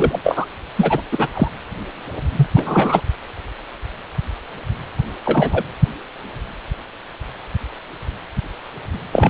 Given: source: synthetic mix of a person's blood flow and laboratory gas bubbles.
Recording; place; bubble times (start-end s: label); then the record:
Doppler ultrasound of blood flow; precordium
0.00-0.19 s: bubbles
0.23-0.46 s: bubbles
0.77-1.02 s: bubbles
1.12-1.29 s: bubbles
1.33-1.48 s: bubbles
2.35-2.47 s: bubbles
2.54-3.02 s: bubbles
5.25-5.64 s: bubbles
9.12-9.30 s: bubbles
From the record:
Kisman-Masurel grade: 223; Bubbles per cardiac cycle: several, 3 to 8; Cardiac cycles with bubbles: 10 to 50%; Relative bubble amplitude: loud (0.450 to 0.775); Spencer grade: 2 (many but less than half of the cardiac periods contain bubble signals, singularly or in groups); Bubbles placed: anywhere in the cardiac cycle